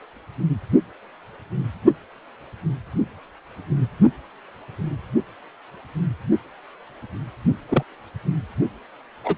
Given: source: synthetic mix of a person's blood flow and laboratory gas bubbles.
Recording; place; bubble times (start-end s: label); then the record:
Doppler ultrasound of blood flow; precordium
7.69-7.84 s: bubbles
9.24-9.36 s: bubbles
From the record:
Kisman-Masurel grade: 122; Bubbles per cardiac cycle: 1 to 2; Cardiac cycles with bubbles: 10 to 50%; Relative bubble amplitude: moderate (0.250 to 0.450); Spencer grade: 2 (many but less than half of the cardiac periods contain bubble signals, singularly or in groups); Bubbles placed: only in the low amplitude regions of the cardiac cycle